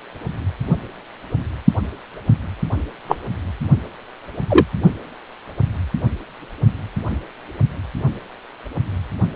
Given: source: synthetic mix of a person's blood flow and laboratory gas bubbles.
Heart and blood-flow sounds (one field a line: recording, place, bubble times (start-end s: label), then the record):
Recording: Doppler ultrasound of blood flow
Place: precordium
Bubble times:
3.08-3.17 s: bubbles
4.50-4.65 s: bubbles
From the record:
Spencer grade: 2 (many but less than half of the cardiac periods contain bubble signals, singularly or in groups)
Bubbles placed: only in the low amplitude regions of the cardiac cycle